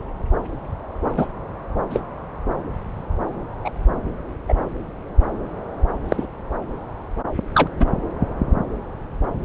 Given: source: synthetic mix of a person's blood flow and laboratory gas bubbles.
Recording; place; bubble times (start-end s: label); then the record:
Doppler ultrasound of blood flow; subclavian vein
1.17-1.26 s: bubbles
1.90-2.02 s: bubbles
3.65-3.71 s: bubbles
4.48-4.54 s: bubbles
6.08-6.26 s: bubbles
7.54-7.68 s: bubbles
7.80-7.86 s: bubbles
From the record:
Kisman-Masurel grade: 123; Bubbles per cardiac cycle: 1 to 2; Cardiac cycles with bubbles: 10 to 50%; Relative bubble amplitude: loud (0.450 to 0.775); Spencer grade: 2 (many but less than half of the cardiac periods contain bubble signals, singularly or in groups); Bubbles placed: anywhere in the cardiac cycle